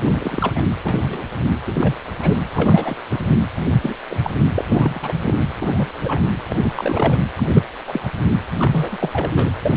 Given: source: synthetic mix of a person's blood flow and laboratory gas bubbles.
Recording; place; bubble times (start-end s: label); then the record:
Doppler ultrasound of blood flow; precordium
0.07-0.64 s: bubbles
0.85-1.24 s: bubbles
1.65-1.95 s: bubbles
2.19-2.38 s: bubbles
2.54-2.96 s: bubbles
3.09-3.36 s: bubbles
3.81-3.94 s: bubbles
4.10-4.31 s: bubbles
4.54-4.64 s: bubbles
4.71-5.13 s: bubbles
5.25-5.39 s: bubbles
5.54-5.94 s: bubbles
5.98-6.27 s: bubbles
6.49-6.71 s: bubbles
6.75-7.18 s: bubbles
7.36-7.63 s: bubbles
7.87-8.09 s: bubbles
8.57-8.97 s: bubbles
9.00-9.09 s: bubbles
9.12-9.50 s: bubbles
9.62-9.77 s: bubbles
From the record:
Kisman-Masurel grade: 242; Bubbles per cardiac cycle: several, 3 to 8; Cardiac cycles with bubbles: 100%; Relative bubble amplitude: moderate (0.250 to 0.450); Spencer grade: 3 (all of the cardiac periods contain showers or single bubble signals, but not dominating or overriding the cardiac motion signals); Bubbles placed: anywhere in the cardiac cycle